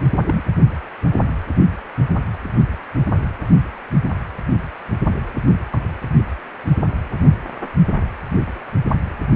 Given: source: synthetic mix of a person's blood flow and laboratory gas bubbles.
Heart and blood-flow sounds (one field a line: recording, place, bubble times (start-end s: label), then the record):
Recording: Doppler ultrasound of blood flow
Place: precordium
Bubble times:
0.27-0.43 s: bubbles
From the record:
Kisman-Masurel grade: 112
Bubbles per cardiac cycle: 1 to 2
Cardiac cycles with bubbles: 1 to 10%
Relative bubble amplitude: moderate (0.250 to 0.450)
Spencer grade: 1 (occasional bubble signal discernible with the cardiac motion signal, with majority of cardiac periods free of bubbles)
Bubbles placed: only in the low amplitude regions of the cardiac cycle